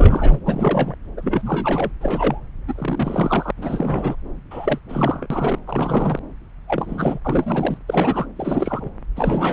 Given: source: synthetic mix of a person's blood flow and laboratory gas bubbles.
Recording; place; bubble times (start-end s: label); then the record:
Doppler ultrasound of blood flow; subclavian vein
0.00-0.41 s: bubbles
0.45-0.95 s: bubbles
1.17-1.92 s: bubbles
2.00-2.40 s: bubbles
2.67-3.51 s: bubbles
3.57-4.16 s: bubbles
4.51-4.79 s: bubbles
4.89-5.27 s: bubbles
5.30-5.59 s: bubbles
5.67-6.19 s: bubbles
6.68-7.19 s: bubbles
7.25-7.78 s: bubbles
7.88-8.27 s: bubbles
8.36-8.91 s: bubbles
9.16-9.53 s: bubbles
From the record:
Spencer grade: 3 (all of the cardiac periods contain showers or single bubble signals, but not dominating or overriding the cardiac motion signals); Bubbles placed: anywhere in the cardiac cycle